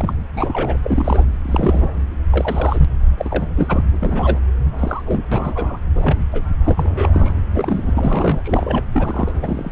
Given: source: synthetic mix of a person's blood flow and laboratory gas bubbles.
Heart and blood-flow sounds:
Doppler ultrasound of blood flow; subclavian vein
0.00-0.14 s: bubbles
0.35-0.77 s: bubbles
0.83-1.25 s: bubbles
1.42-1.92 s: bubbles
2.31-2.85 s: bubbles
3.17-3.46 s: bubbles
3.57-3.84 s: bubbles
4.00-4.40 s: bubbles
4.79-5.03 s: bubbles
5.06-5.21 s: bubbles
5.31-5.77 s: bubbles
5.95-6.22 s: bubbles
6.33-6.42 s: bubbles
6.63-7.33 s: bubbles
7.53-7.91 s: bubbles
7.95-8.87 s: bubbles
8.93-9.32 s: bubbles
9.43-9.72 s: bubbles
From the record:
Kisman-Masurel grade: 242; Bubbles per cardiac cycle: several, 3 to 8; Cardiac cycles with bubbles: 100%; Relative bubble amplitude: moderate (0.250 to 0.450); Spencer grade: 3 (all of the cardiac periods contain showers or single bubble signals, but not dominating or overriding the cardiac motion signals); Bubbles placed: anywhere in the cardiac cycle

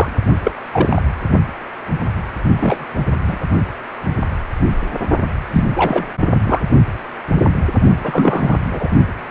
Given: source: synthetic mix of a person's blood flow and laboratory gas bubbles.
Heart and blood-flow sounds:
Doppler ultrasound of blood flow; precordium
0.00-0.12 s: bubbles
0.43-0.51 s: bubbles
0.72-1.02 s: bubbles
2.56-2.85 s: bubbles
3.27-3.39 s: bubbles
5.54-5.64 s: bubbles
5.75-6.04 s: bubbles
6.19-6.39 s: bubbles
6.46-6.62 s: bubbles
7.97-8.57 s: bubbles
8.71-8.89 s: bubbles
From the record:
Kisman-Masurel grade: 223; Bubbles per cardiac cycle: several, 3 to 8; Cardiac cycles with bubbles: 10 to 50%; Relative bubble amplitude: loud (0.450 to 0.775); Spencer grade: 2 (many but less than half of the cardiac periods contain bubble signals, singularly or in groups); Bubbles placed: only in the low amplitude regions of the cardiac cycle

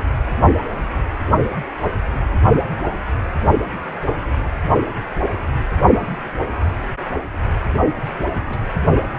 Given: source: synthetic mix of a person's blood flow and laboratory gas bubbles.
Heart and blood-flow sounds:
Doppler ultrasound of blood flow; precordium
8.47-8.61 s: bubbles
From the record:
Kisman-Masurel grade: 111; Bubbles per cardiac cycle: 1 to 2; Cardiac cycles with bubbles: 1 to 10%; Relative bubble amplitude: barely perceptible (0.100 to 0.250); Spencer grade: 1 (occasional bubble signal discernible with the cardiac motion signal, with majority of cardiac periods free of bubbles); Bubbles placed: only in the low amplitude regions of the cardiac cycle

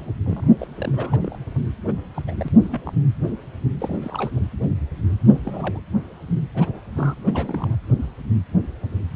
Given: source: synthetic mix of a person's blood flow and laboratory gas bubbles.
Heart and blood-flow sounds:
Doppler ultrasound of blood flow; precordium
0.00-0.10 s: bubbles
0.25-0.50 s: bubbles
0.58-0.67 s: bubbles
0.79-1.19 s: bubbles
1.23-1.37 s: bubbles
1.88-1.93 s: bubbles
2.15-2.22 s: bubbles
2.27-2.48 s: bubbles
2.61-2.94 s: bubbles
3.78-4.31 s: bubbles
5.31-5.41 s: bubbles
5.46-5.80 s: bubbles
6.54-6.82 s: bubbles
6.95-7.15 s: bubbles
7.26-7.76 s: bubbles
From the record:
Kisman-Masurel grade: 221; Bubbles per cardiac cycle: several, 3 to 8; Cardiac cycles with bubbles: 10 to 50%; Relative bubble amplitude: barely perceptible (0.100 to 0.250); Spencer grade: 2 (many but less than half of the cardiac periods contain bubble signals, singularly or in groups); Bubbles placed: anywhere in the cardiac cycle

